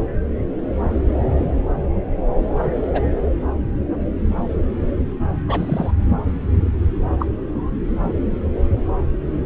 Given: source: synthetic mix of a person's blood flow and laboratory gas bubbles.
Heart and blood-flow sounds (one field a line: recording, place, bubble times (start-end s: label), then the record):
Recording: Doppler ultrasound of blood flow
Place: subclavian vein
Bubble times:
2.93-3.02 s: bubbles
5.47-5.91 s: bubbles
7.19-7.26 s: bubbles
From the record:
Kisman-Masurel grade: 122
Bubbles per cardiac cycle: 1 to 2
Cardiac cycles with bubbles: 10 to 50%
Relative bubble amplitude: moderate (0.250 to 0.450)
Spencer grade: 2 (many but less than half of the cardiac periods contain bubble signals, singularly or in groups)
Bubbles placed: anywhere in the cardiac cycle